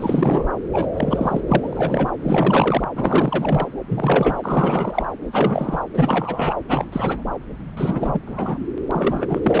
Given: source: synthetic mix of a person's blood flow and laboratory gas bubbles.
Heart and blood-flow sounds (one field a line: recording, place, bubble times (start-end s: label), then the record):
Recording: Doppler ultrasound of blood flow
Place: subclavian vein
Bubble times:
0.00-0.47 s: bubbles
0.72-0.86 s: bubbles
0.92-1.40 s: bubbles
1.47-2.11 s: bubbles
2.23-2.83 s: bubbles
2.95-3.67 s: bubbles
3.89-5.05 s: bubbles
5.32-5.80 s: bubbles
5.93-6.54 s: bubbles
6.68-7.22 s: bubbles
7.77-8.20 s: bubbles
8.27-8.59 s: bubbles
8.91-9.40 s: bubbles
9.43-9.60 s: bubbles
From the record:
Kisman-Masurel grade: 342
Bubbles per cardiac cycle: rolling drumbeat, 9 or more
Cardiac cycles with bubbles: 100%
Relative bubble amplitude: moderate (0.250 to 0.450)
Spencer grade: 3 (all of the cardiac periods contain showers or single bubble signals, but not dominating or overriding the cardiac motion signals)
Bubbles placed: anywhere in the cardiac cycle